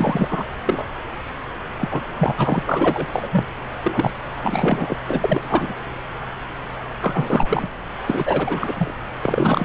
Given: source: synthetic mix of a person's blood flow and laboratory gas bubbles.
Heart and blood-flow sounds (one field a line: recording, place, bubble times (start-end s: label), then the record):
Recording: Doppler ultrasound of blood flow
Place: subclavian vein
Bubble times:
0.00-0.44 s: bubbles
0.66-0.85 s: bubbles
1.78-2.03 s: bubbles
2.18-2.63 s: bubbles
2.66-3.06 s: bubbles
3.12-3.29 s: bubbles
3.31-3.45 s: bubbles
3.83-4.11 s: bubbles
4.43-4.95 s: bubbles
5.08-5.86 s: bubbles
7.01-7.69 s: bubbles
8.06-8.94 s: bubbles
9.22-9.65 s: bubbles
From the record:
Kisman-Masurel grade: 333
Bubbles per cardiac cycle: rolling drumbeat, 9 or more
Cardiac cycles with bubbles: 50 to 99%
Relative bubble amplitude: loud (0.450 to 0.775)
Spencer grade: 3 (all of the cardiac periods contain showers or single bubble signals, but not dominating or overriding the cardiac motion signals)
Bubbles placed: anywhere in the cardiac cycle